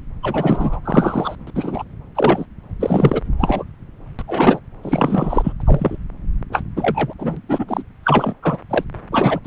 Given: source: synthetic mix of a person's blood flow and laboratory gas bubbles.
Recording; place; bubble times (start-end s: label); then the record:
Doppler ultrasound of blood flow; subclavian vein
0.22-0.80 s: bubbles
0.84-1.35 s: bubbles
1.47-1.50 s: bubbles
1.54-1.83 s: bubbles
2.15-2.46 s: bubbles
2.79-3.21 s: bubbles
3.39-3.64 s: bubbles
4.19-4.23 s: bubbles
4.28-4.60 s: bubbles
4.83-5.53 s: bubbles
5.60-5.97 s: bubbles
6.52-6.62 s: bubbles
6.76-7.13 s: bubbles
7.19-7.41 s: bubbles
7.49-7.83 s: bubbles
8.03-8.34 s: bubbles
8.42-8.57 s: bubbles
8.69-8.84 s: bubbles
9.11-9.39 s: bubbles
9.44-9.46 s: bubbles
From the record:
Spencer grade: 3 (all of the cardiac periods contain showers or single bubble signals, but not dominating or overriding the cardiac motion signals); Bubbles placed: anywhere in the cardiac cycle